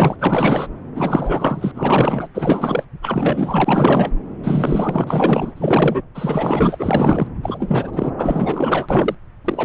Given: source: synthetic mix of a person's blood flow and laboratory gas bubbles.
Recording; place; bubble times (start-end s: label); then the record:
Doppler ultrasound of blood flow; subclavian vein
0.00-0.16 s: bubbles
0.19-0.67 s: bubbles
0.95-1.72 s: bubbles
1.74-2.29 s: bubbles
2.34-2.84 s: bubbles
3.02-4.11 s: bubbles
4.44-5.04 s: bubbles
5.07-6.02 s: bubbles
6.15-7.27 s: bubbles
7.43-8.12 s: bubbles
8.18-9.15 s: bubbles
9.45-9.64 s: bubbles
From the record:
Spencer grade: 4 (maximum detectable bubble signal sounding continuously throughout systole and diastole of every cardiac period, and overriding the amplitude of the normal cardiac signals); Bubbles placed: anywhere in the cardiac cycle